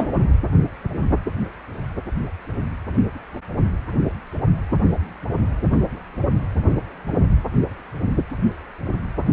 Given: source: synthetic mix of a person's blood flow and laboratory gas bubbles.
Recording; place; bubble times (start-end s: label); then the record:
Doppler ultrasound of blood flow; precordium
0.00-0.12 s: bubbles
From the record:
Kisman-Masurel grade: 113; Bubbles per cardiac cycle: 1 to 2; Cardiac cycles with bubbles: 1 to 10%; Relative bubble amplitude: loud (0.450 to 0.775); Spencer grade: 1 (occasional bubble signal discernible with the cardiac motion signal, with majority of cardiac periods free of bubbles); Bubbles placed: anywhere in the cardiac cycle